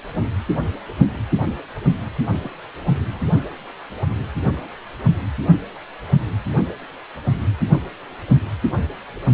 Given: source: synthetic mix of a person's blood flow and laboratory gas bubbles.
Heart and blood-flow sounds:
Doppler ultrasound of blood flow; precordium
2.43-2.49 s: bubbles
3.13-3.19 s: bubbles
From the record:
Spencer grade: 2 (many but less than half of the cardiac periods contain bubble signals, singularly or in groups); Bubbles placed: only in the low amplitude regions of the cardiac cycle

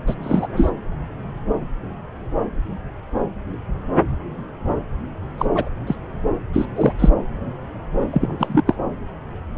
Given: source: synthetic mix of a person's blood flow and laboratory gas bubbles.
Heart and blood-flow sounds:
Doppler ultrasound of blood flow; subclavian vein
0.07-0.14 s: bubbles
0.23-0.48 s: bubbles
0.55-0.71 s: bubbles
5.38-5.46 s: bubbles
5.54-5.69 s: bubbles
5.87-5.96 s: bubbles
6.53-6.66 s: bubbles
6.75-6.92 s: bubbles
6.99-7.09 s: bubbles
8.12-8.37 s: bubbles
8.39-8.63 s: bubbles
8.67-8.76 s: bubbles
From the record:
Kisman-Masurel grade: 223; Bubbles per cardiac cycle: several, 3 to 8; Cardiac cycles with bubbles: 10 to 50%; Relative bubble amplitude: loud (0.450 to 0.775); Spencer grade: 2 (many but less than half of the cardiac periods contain bubble signals, singularly or in groups); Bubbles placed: anywhere in the cardiac cycle

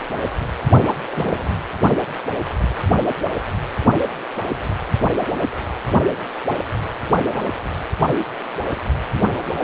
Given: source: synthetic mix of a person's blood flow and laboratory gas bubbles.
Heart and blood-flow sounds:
Doppler ultrasound of blood flow; precordium
0.66-1.00 s: bubbles
1.05-1.55 s: bubbles
From the record:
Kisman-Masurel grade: 211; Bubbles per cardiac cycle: several, 3 to 8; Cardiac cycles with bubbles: 1 to 10%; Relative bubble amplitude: barely perceptible (0.100 to 0.250); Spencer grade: 1 (occasional bubble signal discernible with the cardiac motion signal, with majority of cardiac periods free of bubbles); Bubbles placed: anywhere in the cardiac cycle

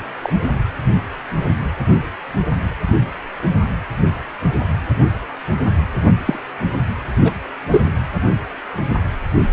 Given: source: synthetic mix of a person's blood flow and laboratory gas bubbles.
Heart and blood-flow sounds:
Doppler ultrasound of blood flow; precordium
0.22-0.33 s: bubbles
6.25-6.39 s: bubbles
7.23-7.32 s: bubbles
7.71-7.87 s: bubbles
From the record:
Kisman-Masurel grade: 123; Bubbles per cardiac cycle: 1 to 2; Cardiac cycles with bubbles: 10 to 50%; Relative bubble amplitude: loud (0.450 to 0.775); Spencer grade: 2 (many but less than half of the cardiac periods contain bubble signals, singularly or in groups); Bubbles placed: anywhere in the cardiac cycle

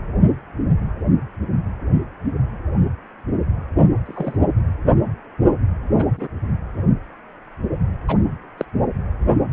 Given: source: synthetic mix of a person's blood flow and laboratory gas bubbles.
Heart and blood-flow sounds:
Doppler ultrasound of blood flow; precordium
4.06-4.38 s: bubbles
5.95-6.05 s: bubbles
6.17-6.28 s: bubbles
8.07-8.17 s: bubbles
8.57-8.65 s: bubbles
From the record:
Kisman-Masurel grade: 122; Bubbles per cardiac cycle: 1 to 2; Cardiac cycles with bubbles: 10 to 50%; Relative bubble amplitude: moderate (0.250 to 0.450); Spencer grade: 2 (many but less than half of the cardiac periods contain bubble signals, singularly or in groups); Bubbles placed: anywhere in the cardiac cycle

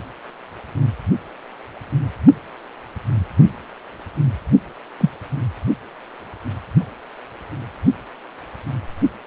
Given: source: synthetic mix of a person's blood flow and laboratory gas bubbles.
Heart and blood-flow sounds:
Doppler ultrasound of blood flow; precordium
5.00-5.09 s: bubbles
From the record:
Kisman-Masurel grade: 113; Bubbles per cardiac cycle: 1 to 2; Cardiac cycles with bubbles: 1 to 10%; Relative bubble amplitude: loud (0.450 to 0.775); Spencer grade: 1 (occasional bubble signal discernible with the cardiac motion signal, with majority of cardiac periods free of bubbles); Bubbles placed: only in the low amplitude regions of the cardiac cycle

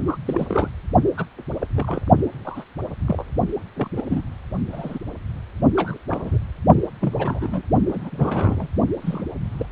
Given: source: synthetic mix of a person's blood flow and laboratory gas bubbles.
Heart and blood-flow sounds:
Doppler ultrasound of blood flow; precordium
0.07-0.17 s: bubbles
0.26-0.68 s: bubbles
1.17-1.25 s: bubbles
1.61-1.67 s: bubbles
1.75-2.02 s: bubbles
2.45-2.64 s: bubbles
3.07-3.25 s: bubbles
3.76-3.88 s: bubbles
3.96-4.03 s: bubbles
4.10-4.21 s: bubbles
4.72-4.99 s: bubbles
5.75-5.99 s: bubbles
6.10-6.38 s: bubbles
7.00-7.62 s: bubbles
7.89-8.68 s: bubbles
9.02-9.24 s: bubbles
9.58-9.65 s: bubbles
From the record:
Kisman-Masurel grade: 242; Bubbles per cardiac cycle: several, 3 to 8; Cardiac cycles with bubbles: 100%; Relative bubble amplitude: moderate (0.250 to 0.450); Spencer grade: 3 (all of the cardiac periods contain showers or single bubble signals, but not dominating or overriding the cardiac motion signals); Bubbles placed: only in the low amplitude regions of the cardiac cycle

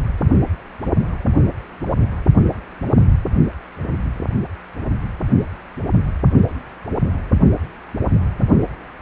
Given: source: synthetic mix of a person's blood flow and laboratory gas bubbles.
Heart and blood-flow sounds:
Doppler ultrasound of blood flow; precordium
no bubbles
From the record:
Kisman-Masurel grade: 000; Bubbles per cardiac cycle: 0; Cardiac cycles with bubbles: 0%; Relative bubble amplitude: no bubbles discernible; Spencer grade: 0 (complete lack of bubble signals)

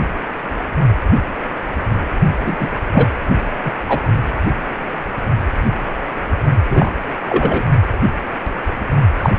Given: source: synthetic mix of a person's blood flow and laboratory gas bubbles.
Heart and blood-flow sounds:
Doppler ultrasound of blood flow; precordium
2.46-2.56 s: bubbles
2.60-2.69 s: bubbles
2.93-3.06 s: bubbles
3.65-3.73 s: bubbles
3.88-4.00 s: bubbles
6.70-6.91 s: bubbles
7.29-7.63 s: bubbles
9.17-9.30 s: bubbles
From the record:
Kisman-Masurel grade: 223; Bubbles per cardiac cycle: several, 3 to 8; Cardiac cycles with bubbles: 10 to 50%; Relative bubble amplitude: loud (0.450 to 0.775); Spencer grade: 2 (many but less than half of the cardiac periods contain bubble signals, singularly or in groups); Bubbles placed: only in the low amplitude regions of the cardiac cycle

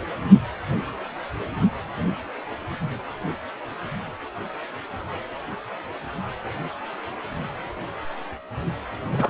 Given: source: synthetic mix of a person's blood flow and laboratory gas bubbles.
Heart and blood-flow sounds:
Doppler ultrasound of blood flow; precordium
9.12-9.30 s: bubbles
From the record:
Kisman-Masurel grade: 222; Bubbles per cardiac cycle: several, 3 to 8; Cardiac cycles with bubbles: 10 to 50%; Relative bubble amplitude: moderate (0.250 to 0.450); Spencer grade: 2 (many but less than half of the cardiac periods contain bubble signals, singularly or in groups); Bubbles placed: anywhere in the cardiac cycle

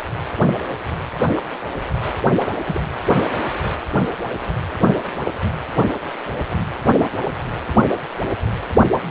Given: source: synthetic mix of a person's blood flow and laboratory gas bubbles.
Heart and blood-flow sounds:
Doppler ultrasound of blood flow; precordium
1.36-1.42 s: bubbles
2.67-2.81 s: bubbles
6.05-6.10 s: bubbles
8.17-8.31 s: bubbles
From the record:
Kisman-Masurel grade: 121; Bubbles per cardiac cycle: 1 to 2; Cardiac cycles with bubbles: 10 to 50%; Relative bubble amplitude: barely perceptible (0.100 to 0.250); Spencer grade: 2 (many but less than half of the cardiac periods contain bubble signals, singularly or in groups); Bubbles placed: anywhere in the cardiac cycle

